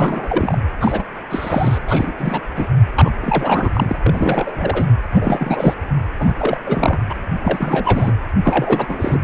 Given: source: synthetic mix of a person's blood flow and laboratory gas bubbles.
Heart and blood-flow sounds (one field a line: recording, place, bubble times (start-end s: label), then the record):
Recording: Doppler ultrasound of blood flow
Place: precordium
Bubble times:
0.00-0.58 s: bubbles
0.81-1.03 s: bubbles
1.29-1.79 s: bubbles
1.88-2.13 s: bubbles
2.18-2.40 s: bubbles
2.56-2.70 s: bubbles
2.96-3.11 s: bubbles
3.21-3.96 s: bubbles
4.03-4.85 s: bubbles
5.14-5.74 s: bubbles
6.18-6.34 s: bubbles
6.38-6.60 s: bubbles
6.66-6.98 s: bubbles
7.09-7.14 s: bubbles
7.43-8.12 s: bubbles
8.44-9.19 s: bubbles
From the record:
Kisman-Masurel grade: 342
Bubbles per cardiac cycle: rolling drumbeat, 9 or more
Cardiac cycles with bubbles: 100%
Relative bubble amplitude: moderate (0.250 to 0.450)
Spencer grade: 3 (all of the cardiac periods contain showers or single bubble signals, but not dominating or overriding the cardiac motion signals)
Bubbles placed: anywhere in the cardiac cycle